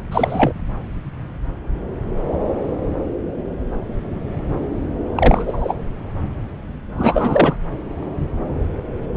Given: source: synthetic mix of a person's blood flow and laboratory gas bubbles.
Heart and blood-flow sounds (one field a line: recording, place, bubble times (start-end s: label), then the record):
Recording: Doppler ultrasound of blood flow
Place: subclavian vein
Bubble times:
0.10-0.53 s: bubbles
5.13-5.75 s: bubbles
6.97-7.56 s: bubbles
From the record:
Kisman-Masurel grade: 223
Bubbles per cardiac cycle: several, 3 to 8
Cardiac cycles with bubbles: 10 to 50%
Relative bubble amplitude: loud (0.450 to 0.775)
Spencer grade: 2 (many but less than half of the cardiac periods contain bubble signals, singularly or in groups)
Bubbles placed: anywhere in the cardiac cycle